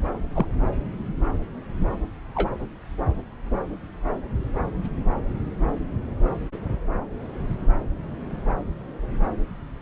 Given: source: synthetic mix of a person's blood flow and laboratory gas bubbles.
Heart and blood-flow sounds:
Doppler ultrasound of blood flow; subclavian vein
0.35-0.46 s: bubbles
2.35-2.49 s: bubbles
From the record:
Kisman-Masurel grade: 122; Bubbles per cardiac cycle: 1 to 2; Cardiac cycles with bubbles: 10 to 50%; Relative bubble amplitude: moderate (0.250 to 0.450); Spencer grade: 2 (many but less than half of the cardiac periods contain bubble signals, singularly or in groups); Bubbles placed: anywhere in the cardiac cycle

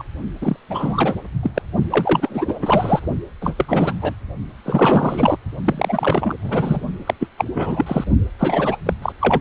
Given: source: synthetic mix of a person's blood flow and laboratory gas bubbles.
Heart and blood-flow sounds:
Doppler ultrasound of blood flow; precordium
0.00-0.03 s: bubbles
0.41-0.56 s: bubbles
0.69-1.14 s: bubbles
1.43-1.51 s: bubbles
1.54-1.62 s: bubbles
1.90-3.00 s: bubbles
3.41-3.94 s: bubbles
4.00-4.14 s: bubbles
4.65-5.38 s: bubbles
5.65-6.34 s: bubbles
6.42-6.80 s: bubbles
7.05-7.14 s: bubbles
7.20-7.27 s: bubbles
7.37-7.45 s: bubbles
7.54-8.04 s: bubbles
8.39-8.77 s: bubbles
8.86-8.93 s: bubbles
9.02-9.12 s: bubbles
9.20-9.40 s: bubbles
From the record:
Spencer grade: 3 (all of the cardiac periods contain showers or single bubble signals, but not dominating or overriding the cardiac motion signals); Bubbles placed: only in the low amplitude regions of the cardiac cycle

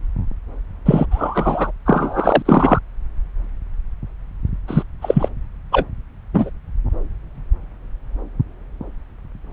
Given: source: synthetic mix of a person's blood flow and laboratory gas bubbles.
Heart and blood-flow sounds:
Doppler ultrasound of blood flow; subclavian vein
0.85-1.06 s: bubbles
1.11-1.71 s: bubbles
1.85-2.42 s: bubbles
2.45-2.79 s: bubbles
4.68-4.83 s: bubbles
5.02-5.29 s: bubbles
5.71-5.85 s: bubbles
6.34-6.51 s: bubbles
From the record:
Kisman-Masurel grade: 223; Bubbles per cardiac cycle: several, 3 to 8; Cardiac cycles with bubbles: 10 to 50%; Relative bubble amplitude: loud (0.450 to 0.775); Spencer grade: 2 (many but less than half of the cardiac periods contain bubble signals, singularly or in groups); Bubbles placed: anywhere in the cardiac cycle

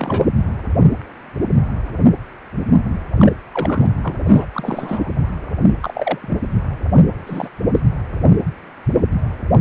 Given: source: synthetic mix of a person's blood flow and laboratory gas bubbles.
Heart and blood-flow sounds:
Doppler ultrasound of blood flow; precordium
0.00-0.26 s: bubbles
3.15-3.33 s: bubbles
3.52-3.86 s: bubbles
4.03-4.16 s: bubbles
4.27-4.46 s: bubbles
4.53-5.10 s: bubbles
5.80-6.19 s: bubbles
6.21-6.37 s: bubbles
7.27-7.49 s: bubbles
7.74-7.81 s: bubbles
From the record:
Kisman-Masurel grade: 222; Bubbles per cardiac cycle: several, 3 to 8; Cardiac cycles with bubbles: 10 to 50%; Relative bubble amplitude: moderate (0.250 to 0.450); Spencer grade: 2 (many but less than half of the cardiac periods contain bubble signals, singularly or in groups); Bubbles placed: anywhere in the cardiac cycle

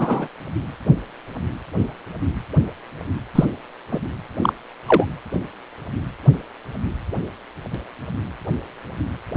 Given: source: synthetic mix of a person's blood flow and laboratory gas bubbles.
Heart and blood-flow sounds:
Doppler ultrasound of blood flow; precordium
0.00-0.28 s: bubbles
3.35-3.45 s: bubbles
3.92-4.00 s: bubbles
4.42-4.53 s: bubbles
4.88-5.05 s: bubbles
From the record:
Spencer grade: 2 (many but less than half of the cardiac periods contain bubble signals, singularly or in groups); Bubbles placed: anywhere in the cardiac cycle

